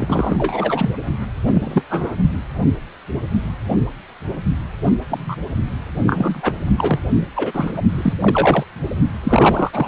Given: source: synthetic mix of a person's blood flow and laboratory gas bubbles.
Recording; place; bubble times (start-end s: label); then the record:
Doppler ultrasound of blood flow; precordium
0.00-0.90 s: bubbles
1.47-1.83 s: bubbles
1.90-2.15 s: bubbles
5.09-5.35 s: bubbles
6.07-6.53 s: bubbles
6.77-7.00 s: bubbles
7.36-7.81 s: bubbles
7.89-8.13 s: bubbles
8.19-8.64 s: bubbles
9.23-9.88 s: bubbles
From the record:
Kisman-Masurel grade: 233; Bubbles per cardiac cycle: several, 3 to 8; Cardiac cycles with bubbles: 50 to 99%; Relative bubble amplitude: loud (0.450 to 0.775); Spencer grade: 3 (all of the cardiac periods contain showers or single bubble signals, but not dominating or overriding the cardiac motion signals); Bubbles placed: only in the low amplitude regions of the cardiac cycle